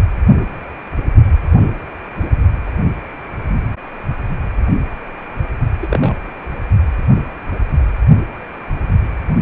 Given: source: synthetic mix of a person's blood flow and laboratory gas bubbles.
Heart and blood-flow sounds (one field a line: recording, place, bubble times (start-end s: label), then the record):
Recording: Doppler ultrasound of blood flow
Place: precordium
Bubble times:
5.82-5.87 s: bubbles
5.90-6.14 s: bubbles
From the record:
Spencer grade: 1 (occasional bubble signal discernible with the cardiac motion signal, with majority of cardiac periods free of bubbles)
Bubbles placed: anywhere in the cardiac cycle